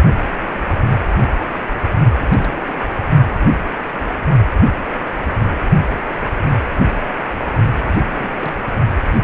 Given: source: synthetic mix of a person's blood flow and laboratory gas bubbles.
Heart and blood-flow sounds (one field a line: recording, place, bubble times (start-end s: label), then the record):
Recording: Doppler ultrasound of blood flow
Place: precordium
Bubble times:
2.19-2.73 s: bubbles
2.90-3.00 s: bubbles
7.80-8.35 s: bubbles
8.41-8.70 s: bubbles
9.13-9.20 s: bubbles
From the record:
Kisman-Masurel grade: 221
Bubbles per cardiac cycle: several, 3 to 8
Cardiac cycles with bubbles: 10 to 50%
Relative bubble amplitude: barely perceptible (0.100 to 0.250)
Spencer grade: 2 (many but less than half of the cardiac periods contain bubble signals, singularly or in groups)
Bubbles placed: only in the low amplitude regions of the cardiac cycle